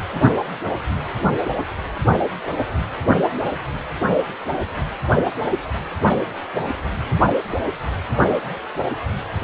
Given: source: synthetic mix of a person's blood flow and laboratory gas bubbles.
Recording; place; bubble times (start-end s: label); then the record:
Doppler ultrasound of blood flow; precordium
no bubbles
From the record:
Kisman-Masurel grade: 000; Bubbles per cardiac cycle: 0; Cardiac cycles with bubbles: 0%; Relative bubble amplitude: no bubbles discernible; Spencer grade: 0 (complete lack of bubble signals)